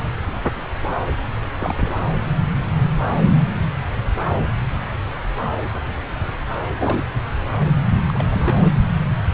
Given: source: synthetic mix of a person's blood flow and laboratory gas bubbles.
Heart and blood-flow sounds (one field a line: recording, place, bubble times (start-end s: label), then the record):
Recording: Doppler ultrasound of blood flow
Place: subclavian vein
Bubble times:
1.58-1.75 s: bubbles
1.79-1.98 s: bubbles
6.80-7.06 s: bubbles
7.92-8.05 s: bubbles
8.08-8.26 s: bubbles
8.32-8.42 s: bubbles
8.46-8.73 s: bubbles
From the record:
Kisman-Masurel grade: 221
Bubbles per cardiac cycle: several, 3 to 8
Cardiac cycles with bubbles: 10 to 50%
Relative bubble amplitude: barely perceptible (0.100 to 0.250)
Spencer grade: 2 (many but less than half of the cardiac periods contain bubble signals, singularly or in groups)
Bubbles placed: anywhere in the cardiac cycle